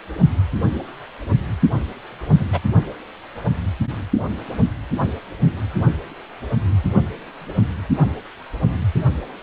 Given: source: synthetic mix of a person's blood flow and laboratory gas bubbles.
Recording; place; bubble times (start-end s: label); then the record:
Doppler ultrasound of blood flow; precordium
2.39-2.46 s: bubbles
2.52-2.60 s: bubbles
From the record:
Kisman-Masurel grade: 113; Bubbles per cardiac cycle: 1 to 2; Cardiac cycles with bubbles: 1 to 10%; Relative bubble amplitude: loud (0.450 to 0.775); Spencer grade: 1 (occasional bubble signal discernible with the cardiac motion signal, with majority of cardiac periods free of bubbles); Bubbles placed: only in the low amplitude regions of the cardiac cycle